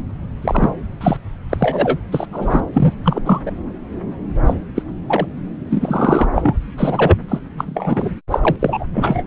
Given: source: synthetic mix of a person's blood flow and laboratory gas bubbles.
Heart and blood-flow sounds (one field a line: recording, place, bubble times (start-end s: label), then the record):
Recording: Doppler ultrasound of blood flow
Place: subclavian vein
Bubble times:
0.41-0.71 s: bubbles
1.01-1.17 s: bubbles
1.50-1.99 s: bubbles
2.12-2.26 s: bubbles
2.32-2.60 s: bubbles
2.73-2.93 s: bubbles
3.03-3.20 s: bubbles
3.24-3.40 s: bubbles
3.45-3.51 s: bubbles
4.46-4.54 s: bubbles
4.75-4.82 s: bubbles
5.08-5.25 s: bubbles
5.71-6.27 s: bubbles
6.36-6.55 s: bubbles
6.78-7.16 s: bubbles
7.28-7.39 s: bubbles
7.58-8.11 s: bubbles
8.30-8.56 s: bubbles
8.59-8.85 s: bubbles
8.94-9.23 s: bubbles
From the record:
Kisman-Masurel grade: 233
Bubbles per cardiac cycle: several, 3 to 8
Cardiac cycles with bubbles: 50 to 99%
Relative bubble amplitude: loud (0.450 to 0.775)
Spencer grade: 3 (all of the cardiac periods contain showers or single bubble signals, but not dominating or overriding the cardiac motion signals)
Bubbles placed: anywhere in the cardiac cycle